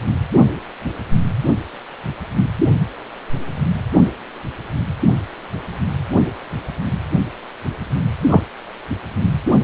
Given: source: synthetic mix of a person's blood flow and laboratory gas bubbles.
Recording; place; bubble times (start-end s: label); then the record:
Doppler ultrasound of blood flow; precordium
8.29-8.43 s: bubbles
From the record:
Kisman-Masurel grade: 113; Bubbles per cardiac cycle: 1 to 2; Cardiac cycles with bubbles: 1 to 10%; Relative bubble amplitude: loud (0.450 to 0.775); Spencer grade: 1 (occasional bubble signal discernible with the cardiac motion signal, with majority of cardiac periods free of bubbles); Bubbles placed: anywhere in the cardiac cycle